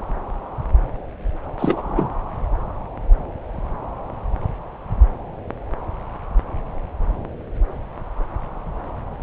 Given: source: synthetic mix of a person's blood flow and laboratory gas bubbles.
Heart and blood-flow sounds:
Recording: Doppler ultrasound of blood flow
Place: subclavian vein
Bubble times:
1.58-2.10 s: bubbles
From the record:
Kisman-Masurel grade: 212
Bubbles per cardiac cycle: several, 3 to 8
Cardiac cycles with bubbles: 1 to 10%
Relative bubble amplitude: moderate (0.250 to 0.450)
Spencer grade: 1 (occasional bubble signal discernible with the cardiac motion signal, with majority of cardiac periods free of bubbles)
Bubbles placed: anywhere in the cardiac cycle

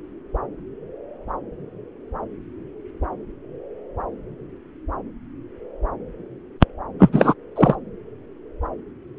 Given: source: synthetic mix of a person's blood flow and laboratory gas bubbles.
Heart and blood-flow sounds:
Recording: Doppler ultrasound of blood flow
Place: subclavian vein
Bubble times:
6.99-7.10 s: bubbles
7.12-7.34 s: bubbles
7.55-7.75 s: bubbles
From the record:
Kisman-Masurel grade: 213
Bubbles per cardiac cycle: several, 3 to 8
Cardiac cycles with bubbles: 1 to 10%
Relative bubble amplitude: loud (0.450 to 0.775)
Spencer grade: 1 (occasional bubble signal discernible with the cardiac motion signal, with majority of cardiac periods free of bubbles)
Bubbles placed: anywhere in the cardiac cycle

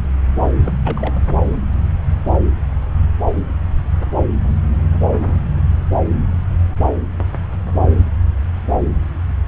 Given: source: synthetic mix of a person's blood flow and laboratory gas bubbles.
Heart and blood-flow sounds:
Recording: Doppler ultrasound of blood flow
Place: subclavian vein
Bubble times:
0.63-0.73 s: bubbles
0.84-1.20 s: bubbles
From the record:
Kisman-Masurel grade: 211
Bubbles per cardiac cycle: several, 3 to 8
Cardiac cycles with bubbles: 1 to 10%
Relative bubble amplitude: barely perceptible (0.100 to 0.250)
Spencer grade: 1 (occasional bubble signal discernible with the cardiac motion signal, with majority of cardiac periods free of bubbles)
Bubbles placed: anywhere in the cardiac cycle

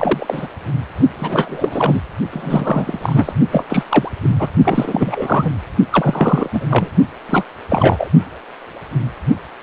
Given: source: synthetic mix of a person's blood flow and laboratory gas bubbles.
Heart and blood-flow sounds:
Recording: Doppler ultrasound of blood flow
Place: precordium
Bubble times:
0.00-0.48 s: bubbles
1.17-2.02 s: bubbles
2.31-3.33 s: bubbles
3.52-3.65 s: bubbles
3.69-3.83 s: bubbles
3.89-4.09 s: bubbles
4.22-4.47 s: bubbles
4.64-5.50 s: bubbles
5.92-6.50 s: bubbles
6.53-6.65 s: bubbles
6.70-6.89 s: bubbles
7.29-7.45 s: bubbles
7.70-8.10 s: bubbles
From the record:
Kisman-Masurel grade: 333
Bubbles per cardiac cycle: rolling drumbeat, 9 or more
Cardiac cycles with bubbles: 50 to 99%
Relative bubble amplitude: loud (0.450 to 0.775)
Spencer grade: 3 (all of the cardiac periods contain showers or single bubble signals, but not dominating or overriding the cardiac motion signals)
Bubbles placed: only in the low amplitude regions of the cardiac cycle

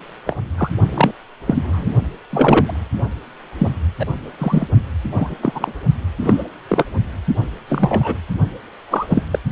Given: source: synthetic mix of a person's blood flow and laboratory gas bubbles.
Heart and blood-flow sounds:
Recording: Doppler ultrasound of blood flow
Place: precordium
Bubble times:
0.26-0.37 s: bubbles
0.57-0.70 s: bubbles
0.94-1.11 s: bubbles
1.45-1.92 s: bubbles
2.30-2.80 s: bubbles
3.58-3.69 s: bubbles
3.99-4.05 s: bubbles
4.38-4.67 s: bubbles
5.10-5.37 s: bubbles
5.41-5.73 s: bubbles
6.21-6.43 s: bubbles
6.69-6.84 s: bubbles
7.68-8.16 s: bubbles
8.90-9.22 s: bubbles
9.31-9.39 s: bubbles
From the record:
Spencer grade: 3 (all of the cardiac periods contain showers or single bubble signals, but not dominating or overriding the cardiac motion signals)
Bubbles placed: only in the low amplitude regions of the cardiac cycle

